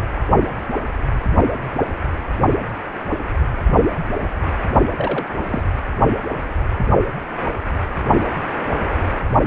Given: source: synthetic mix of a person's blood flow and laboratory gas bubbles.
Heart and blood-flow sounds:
Doppler ultrasound of blood flow; precordium
4.97-5.25 s: bubbles
5.49-5.62 s: bubbles
From the record:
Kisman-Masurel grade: 122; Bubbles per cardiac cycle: 1 to 2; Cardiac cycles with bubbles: 10 to 50%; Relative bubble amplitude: moderate (0.250 to 0.450); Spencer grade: 2 (many but less than half of the cardiac periods contain bubble signals, singularly or in groups); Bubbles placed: only in the low amplitude regions of the cardiac cycle

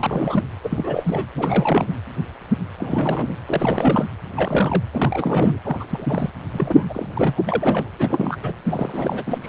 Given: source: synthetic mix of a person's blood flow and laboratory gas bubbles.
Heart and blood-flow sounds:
Doppler ultrasound of blood flow; precordium
0.00-0.44 s: bubbles
0.63-1.27 s: bubbles
1.35-2.00 s: bubbles
2.77-3.36 s: bubbles
3.46-4.06 s: bubbles
4.36-4.83 s: bubbles
4.91-5.58 s: bubbles
5.63-5.87 s: bubbles
5.90-6.30 s: bubbles
6.53-6.87 s: bubbles
6.89-7.43 s: bubbles
7.47-7.90 s: bubbles
7.99-8.37 s: bubbles
8.42-8.52 s: bubbles
8.64-9.23 s: bubbles
9.26-9.38 s: bubbles
9.41-9.49 s: bubbles
From the record:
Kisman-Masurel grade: 332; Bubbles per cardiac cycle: rolling drumbeat, 9 or more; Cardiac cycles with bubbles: 50 to 99%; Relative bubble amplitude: moderate (0.250 to 0.450); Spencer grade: 3 (all of the cardiac periods contain showers or single bubble signals, but not dominating or overriding the cardiac motion signals); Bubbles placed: anywhere in the cardiac cycle

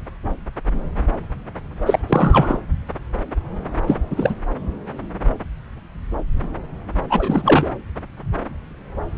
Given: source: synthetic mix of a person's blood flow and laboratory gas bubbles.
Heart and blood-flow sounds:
Doppler ultrasound of blood flow; subclavian vein
1.86-1.99 s: bubbles
2.08-2.57 s: bubbles
3.87-3.96 s: bubbles
4.11-4.34 s: bubbles
7.10-7.71 s: bubbles
From the record:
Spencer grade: 2 (many but less than half of the cardiac periods contain bubble signals, singularly or in groups); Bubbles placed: anywhere in the cardiac cycle

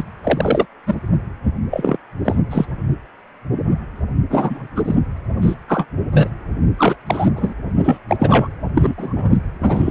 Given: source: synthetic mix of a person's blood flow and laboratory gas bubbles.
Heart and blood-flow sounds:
Doppler ultrasound of blood flow; precordium
0.00-0.04 s: bubbles
0.23-0.65 s: bubbles
0.86-0.95 s: bubbles
1.70-1.97 s: bubbles
2.25-2.39 s: bubbles
2.50-2.66 s: bubbles
4.29-4.67 s: bubbles
4.76-4.96 s: bubbles
5.42-5.54 s: bubbles
5.67-5.86 s: bubbles
6.12-6.30 s: bubbles
6.77-6.96 s: bubbles
7.07-7.29 s: bubbles
7.36-7.54 s: bubbles
7.83-7.98 s: bubbles
8.08-8.16 s: bubbles
8.19-8.47 s: bubbles
8.74-8.93 s: bubbles
8.97-9.38 s: bubbles
9.60-9.91 s: bubbles
From the record:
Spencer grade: 3 (all of the cardiac periods contain showers or single bubble signals, but not dominating or overriding the cardiac motion signals); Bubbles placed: anywhere in the cardiac cycle

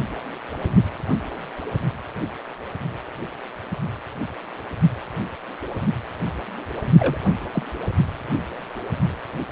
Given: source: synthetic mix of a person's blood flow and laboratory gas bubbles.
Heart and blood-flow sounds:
Doppler ultrasound of blood flow; precordium
6.98-7.18 s: bubbles
7.52-7.63 s: bubbles
From the record:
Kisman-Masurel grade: 112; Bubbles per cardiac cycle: 1 to 2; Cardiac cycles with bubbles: 1 to 10%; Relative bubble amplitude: moderate (0.250 to 0.450); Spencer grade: 1 (occasional bubble signal discernible with the cardiac motion signal, with majority of cardiac periods free of bubbles); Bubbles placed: anywhere in the cardiac cycle

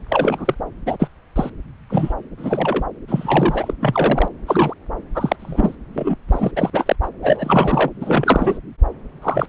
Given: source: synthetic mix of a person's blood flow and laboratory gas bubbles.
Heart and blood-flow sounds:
Doppler ultrasound of blood flow; subclavian vein
0.08-0.54 s: bubbles
0.86-0.96 s: bubbles
0.99-1.08 s: bubbles
1.35-1.50 s: bubbles
1.89-2.14 s: bubbles
2.37-2.85 s: bubbles
3.08-3.73 s: bubbles
3.80-4.29 s: bubbles
4.46-4.74 s: bubbles
5.15-5.36 s: bubbles
5.40-5.75 s: bubbles
5.94-6.16 s: bubbles
6.27-6.52 s: bubbles
6.56-6.70 s: bubbles
6.73-6.96 s: bubbles
7.02-7.09 s: bubbles
7.22-7.89 s: bubbles
8.01-8.58 s: bubbles
9.22-9.46 s: bubbles
From the record:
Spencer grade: 3 (all of the cardiac periods contain showers or single bubble signals, but not dominating or overriding the cardiac motion signals); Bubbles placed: anywhere in the cardiac cycle

